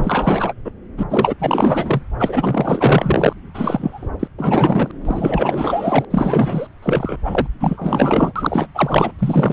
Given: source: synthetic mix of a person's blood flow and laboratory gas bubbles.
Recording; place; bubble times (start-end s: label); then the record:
Doppler ultrasound of blood flow; subclavian vein
0.00-0.54 s: bubbles
0.65-0.71 s: bubbles
0.97-1.03 s: bubbles
1.10-1.34 s: bubbles
1.39-2.02 s: bubbles
2.19-3.33 s: bubbles
3.54-4.09 s: bubbles
4.19-4.27 s: bubbles
4.38-4.91 s: bubbles
5.05-6.05 s: bubbles
6.10-6.67 s: bubbles
6.82-7.17 s: bubbles
7.25-7.47 s: bubbles
7.59-8.32 s: bubbles
8.36-8.68 s: bubbles
8.74-9.12 s: bubbles
9.18-9.53 s: bubbles
From the record:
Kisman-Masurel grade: 444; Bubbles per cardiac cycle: continuous sound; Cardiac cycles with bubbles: 100%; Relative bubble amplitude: maximal (0.775 to 0.999); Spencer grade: 4 (maximum detectable bubble signal sounding continuously throughout systole and diastole of every cardiac period, and overriding the amplitude of the normal cardiac signals); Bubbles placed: anywhere in the cardiac cycle